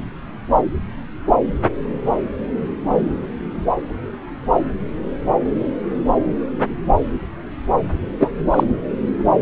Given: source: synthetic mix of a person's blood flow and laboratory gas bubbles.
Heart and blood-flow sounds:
Doppler ultrasound of blood flow; subclavian vein
8.20-8.30 s: bubbles
8.50-8.63 s: bubbles
From the record:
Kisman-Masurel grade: 123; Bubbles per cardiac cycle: 1 to 2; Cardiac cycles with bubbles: 10 to 50%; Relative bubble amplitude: loud (0.450 to 0.775); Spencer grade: 2 (many but less than half of the cardiac periods contain bubble signals, singularly or in groups); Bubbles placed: anywhere in the cardiac cycle

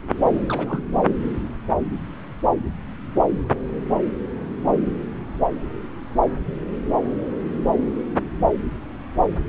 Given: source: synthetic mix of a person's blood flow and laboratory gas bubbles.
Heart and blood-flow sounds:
Doppler ultrasound of blood flow; subclavian vein
0.48-0.82 s: bubbles
0.92-1.03 s: bubbles
From the record:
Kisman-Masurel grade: 211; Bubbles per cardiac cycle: several, 3 to 8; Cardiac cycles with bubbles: 1 to 10%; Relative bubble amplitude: barely perceptible (0.100 to 0.250); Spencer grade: 1 (occasional bubble signal discernible with the cardiac motion signal, with majority of cardiac periods free of bubbles); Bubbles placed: anywhere in the cardiac cycle

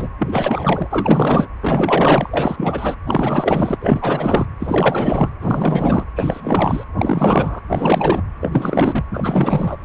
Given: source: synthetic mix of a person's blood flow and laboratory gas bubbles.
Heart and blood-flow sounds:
Doppler ultrasound of blood flow; precordium
0.00-0.09 s: bubbles
0.18-0.88 s: bubbles
0.91-1.47 s: bubbles
1.61-2.95 s: bubbles
3.06-4.46 s: bubbles
4.59-5.30 s: bubbles
5.40-6.04 s: bubbles
6.16-6.83 s: bubbles
6.98-7.61 s: bubbles
7.69-8.22 s: bubbles
8.41-9.04 s: bubbles
9.10-9.76 s: bubbles
From the record:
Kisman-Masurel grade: 444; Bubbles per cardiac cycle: continuous sound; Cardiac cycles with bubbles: 100%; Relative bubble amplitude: maximal (0.775 to 0.999); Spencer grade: 4 (maximum detectable bubble signal sounding continuously throughout systole and diastole of every cardiac period, and overriding the amplitude of the normal cardiac signals); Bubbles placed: anywhere in the cardiac cycle

